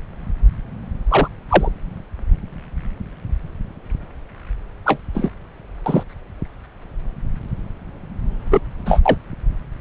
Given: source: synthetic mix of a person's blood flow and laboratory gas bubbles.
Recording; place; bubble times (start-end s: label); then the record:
Doppler ultrasound of blood flow; subclavian vein
1.09-1.28 s: bubbles
1.49-1.69 s: bubbles
4.85-4.99 s: bubbles
5.14-5.29 s: bubbles
5.86-6.03 s: bubbles
8.51-8.62 s: bubbles
8.86-9.00 s: bubbles
9.06-9.17 s: bubbles
From the record:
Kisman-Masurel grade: 123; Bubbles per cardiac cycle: 1 to 2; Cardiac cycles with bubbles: 10 to 50%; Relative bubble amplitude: loud (0.450 to 0.775); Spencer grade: 2 (many but less than half of the cardiac periods contain bubble signals, singularly or in groups); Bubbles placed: anywhere in the cardiac cycle